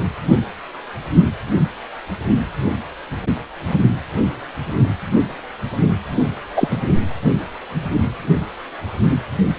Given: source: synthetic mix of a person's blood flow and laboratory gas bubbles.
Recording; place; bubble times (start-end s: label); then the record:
Doppler ultrasound of blood flow; precordium
6.56-6.68 s: bubbles
6.71-6.78 s: bubbles
From the record:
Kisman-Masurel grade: 223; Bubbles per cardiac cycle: several, 3 to 8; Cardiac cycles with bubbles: 10 to 50%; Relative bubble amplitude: loud (0.450 to 0.775); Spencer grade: 2 (many but less than half of the cardiac periods contain bubble signals, singularly or in groups); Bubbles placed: only in the low amplitude regions of the cardiac cycle